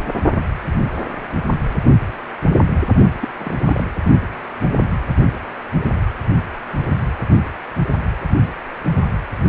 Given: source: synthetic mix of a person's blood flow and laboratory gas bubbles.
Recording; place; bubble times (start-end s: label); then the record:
Doppler ultrasound of blood flow; precordium
2.98-3.05 s: bubbles
3.20-3.29 s: bubbles
3.38-3.84 s: bubbles
From the record:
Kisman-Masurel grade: 211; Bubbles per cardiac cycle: several, 3 to 8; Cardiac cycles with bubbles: 1 to 10%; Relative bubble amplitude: barely perceptible (0.100 to 0.250); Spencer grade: 1 (occasional bubble signal discernible with the cardiac motion signal, with majority of cardiac periods free of bubbles); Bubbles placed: anywhere in the cardiac cycle